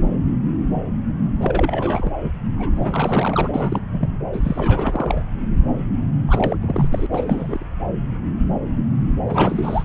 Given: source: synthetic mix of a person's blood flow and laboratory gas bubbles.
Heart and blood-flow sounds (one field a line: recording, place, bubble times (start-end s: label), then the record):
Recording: Doppler ultrasound of blood flow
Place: subclavian vein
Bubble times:
1.38-2.11 s: bubbles
2.23-2.32 s: bubbles
2.57-3.79 s: bubbles
3.94-4.09 s: bubbles
4.33-5.25 s: bubbles
6.27-6.56 s: bubbles
6.62-6.88 s: bubbles
6.91-7.07 s: bubbles
7.11-7.65 s: bubbles
9.27-9.83 s: bubbles
From the record:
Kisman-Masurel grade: 332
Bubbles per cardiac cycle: rolling drumbeat, 9 or more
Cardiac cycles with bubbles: 50 to 99%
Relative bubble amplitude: moderate (0.250 to 0.450)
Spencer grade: 3 (all of the cardiac periods contain showers or single bubble signals, but not dominating or overriding the cardiac motion signals)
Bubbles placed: anywhere in the cardiac cycle